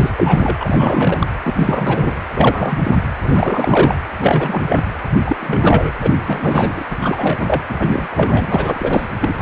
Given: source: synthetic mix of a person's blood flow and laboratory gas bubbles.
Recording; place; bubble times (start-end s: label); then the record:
Doppler ultrasound of blood flow; precordium
0.00-0.11 s: bubbles
0.16-1.27 s: bubbles
1.43-1.54 s: bubbles
1.56-2.17 s: bubbles
2.35-2.96 s: bubbles
3.21-3.96 s: bubbles
4.21-4.62 s: bubbles
4.66-4.83 s: bubbles
5.26-5.36 s: bubbles
5.40-5.91 s: bubbles
6.01-6.83 s: bubbles
6.90-6.96 s: bubbles
7.01-7.62 s: bubbles
7.69-8.08 s: bubbles
8.11-9.07 s: bubbles
9.20-9.42 s: bubbles
From the record:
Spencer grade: 3 (all of the cardiac periods contain showers or single bubble signals, but not dominating or overriding the cardiac motion signals); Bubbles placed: anywhere in the cardiac cycle